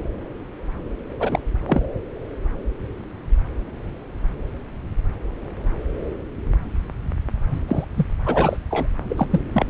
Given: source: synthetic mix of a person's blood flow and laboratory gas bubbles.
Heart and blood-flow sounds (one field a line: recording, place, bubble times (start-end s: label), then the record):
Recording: Doppler ultrasound of blood flow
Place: subclavian vein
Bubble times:
1.19-1.39 s: bubbles
1.67-1.85 s: bubbles
7.52-7.59 s: bubbles
7.67-7.84 s: bubbles
7.95-8.06 s: bubbles
8.26-8.57 s: bubbles
8.71-8.87 s: bubbles
9.09-9.27 s: bubbles
9.30-9.40 s: bubbles
9.53-9.66 s: bubbles
From the record:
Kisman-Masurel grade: 222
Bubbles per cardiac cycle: several, 3 to 8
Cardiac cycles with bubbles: 10 to 50%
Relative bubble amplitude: moderate (0.250 to 0.450)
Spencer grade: 2 (many but less than half of the cardiac periods contain bubble signals, singularly or in groups)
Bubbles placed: anywhere in the cardiac cycle